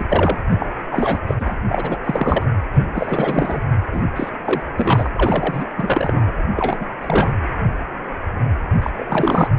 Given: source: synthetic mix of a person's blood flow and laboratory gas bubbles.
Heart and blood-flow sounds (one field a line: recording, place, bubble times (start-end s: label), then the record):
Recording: Doppler ultrasound of blood flow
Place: precordium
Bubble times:
0.00-0.06 s: bubbles
0.09-0.39 s: bubbles
0.49-0.67 s: bubbles
0.92-1.19 s: bubbles
1.27-1.34 s: bubbles
1.39-1.55 s: bubbles
1.69-1.98 s: bubbles
2.04-2.46 s: bubbles
2.73-2.84 s: bubbles
2.94-3.61 s: bubbles
3.92-4.04 s: bubbles
4.16-4.29 s: bubbles
4.45-4.62 s: bubbles
4.75-5.10 s: bubbles
5.16-5.65 s: bubbles
5.77-6.32 s: bubbles
6.56-6.87 s: bubbles
7.00-7.35 s: bubbles
8.81-8.90 s: bubbles
8.96-9.51 s: bubbles
From the record:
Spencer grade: 3 (all of the cardiac periods contain showers or single bubble signals, but not dominating or overriding the cardiac motion signals)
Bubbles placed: anywhere in the cardiac cycle